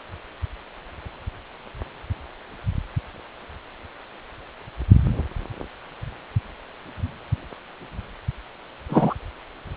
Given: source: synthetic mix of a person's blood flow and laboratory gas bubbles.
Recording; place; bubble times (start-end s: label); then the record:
Doppler ultrasound of blood flow; precordium
8.89-9.14 s: bubbles
From the record:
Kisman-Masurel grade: 222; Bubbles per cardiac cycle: several, 3 to 8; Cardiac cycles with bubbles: 10 to 50%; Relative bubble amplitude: moderate (0.250 to 0.450); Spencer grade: 2 (many but less than half of the cardiac periods contain bubble signals, singularly or in groups); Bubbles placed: anywhere in the cardiac cycle